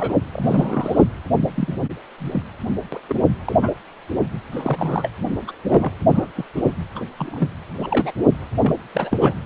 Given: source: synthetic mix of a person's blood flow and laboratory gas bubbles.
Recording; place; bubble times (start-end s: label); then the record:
Doppler ultrasound of blood flow; precordium
0.00-0.16 s: bubbles
0.33-1.04 s: bubbles
1.47-1.86 s: bubbles
2.18-2.43 s: bubbles
2.92-3.00 s: bubbles
3.09-3.15 s: bubbles
3.46-3.54 s: bubbles
3.61-3.69 s: bubbles
4.52-5.09 s: bubbles
5.47-5.52 s: bubbles
5.68-5.91 s: bubbles
6.12-6.31 s: bubbles
6.36-6.44 s: bubbles
6.56-6.73 s: bubbles
6.95-7.04 s: bubbles
7.18-7.48 s: bubbles
7.78-8.12 s: bubbles
8.62-8.73 s: bubbles
8.95-9.34 s: bubbles
From the record:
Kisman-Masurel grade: 242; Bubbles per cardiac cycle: several, 3 to 8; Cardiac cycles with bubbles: 100%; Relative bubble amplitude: moderate (0.250 to 0.450); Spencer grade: 3 (all of the cardiac periods contain showers or single bubble signals, but not dominating or overriding the cardiac motion signals); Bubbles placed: anywhere in the cardiac cycle